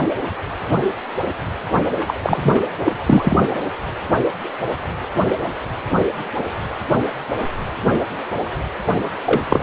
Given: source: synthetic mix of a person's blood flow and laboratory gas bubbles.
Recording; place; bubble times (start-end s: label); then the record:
Doppler ultrasound of blood flow; precordium
2.08-2.14 s: bubbles
2.22-2.60 s: bubbles
2.85-2.92 s: bubbles
3.06-3.38 s: bubbles
9.26-9.42 s: bubbles
9.49-9.63 s: bubbles
From the record:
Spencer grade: 2 (many but less than half of the cardiac periods contain bubble signals, singularly or in groups); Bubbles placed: anywhere in the cardiac cycle